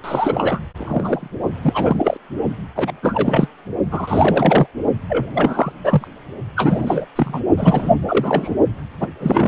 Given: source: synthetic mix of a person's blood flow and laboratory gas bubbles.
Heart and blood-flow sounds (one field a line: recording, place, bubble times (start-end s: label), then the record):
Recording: Doppler ultrasound of blood flow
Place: precordium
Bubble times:
0.04-0.61 s: bubbles
0.78-1.28 s: bubbles
1.63-2.17 s: bubbles
2.75-2.92 s: bubbles
3.02-3.48 s: bubbles
3.90-4.67 s: bubbles
5.08-5.26 s: bubbles
5.34-5.72 s: bubbles
5.84-6.08 s: bubbles
6.56-7.05 s: bubbles
7.15-7.40 s: bubbles
7.56-7.95 s: bubbles
8.08-8.54 s: bubbles
9.00-9.08 s: bubbles
9.20-9.48 s: bubbles
From the record:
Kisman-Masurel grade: 333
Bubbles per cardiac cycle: rolling drumbeat, 9 or more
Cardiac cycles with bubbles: 50 to 99%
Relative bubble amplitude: loud (0.450 to 0.775)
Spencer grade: 3 (all of the cardiac periods contain showers or single bubble signals, but not dominating or overriding the cardiac motion signals)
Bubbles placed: only in the low amplitude regions of the cardiac cycle